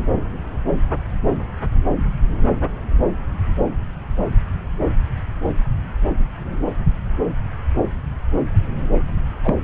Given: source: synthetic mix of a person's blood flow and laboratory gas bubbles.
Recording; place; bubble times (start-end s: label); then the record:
Doppler ultrasound of blood flow; subclavian vein
9.43-9.54 s: bubbles
From the record:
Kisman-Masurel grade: 112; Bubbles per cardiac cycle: 1 to 2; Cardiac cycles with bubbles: 1 to 10%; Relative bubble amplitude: moderate (0.250 to 0.450); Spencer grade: 1 (occasional bubble signal discernible with the cardiac motion signal, with majority of cardiac periods free of bubbles); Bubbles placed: anywhere in the cardiac cycle